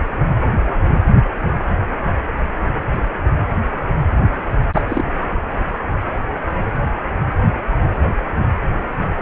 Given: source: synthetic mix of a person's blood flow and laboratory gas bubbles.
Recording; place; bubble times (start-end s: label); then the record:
Doppler ultrasound of blood flow; precordium
4.73-4.81 s: bubbles
4.88-5.04 s: bubbles
From the record:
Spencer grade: 1 (occasional bubble signal discernible with the cardiac motion signal, with majority of cardiac periods free of bubbles); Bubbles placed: anywhere in the cardiac cycle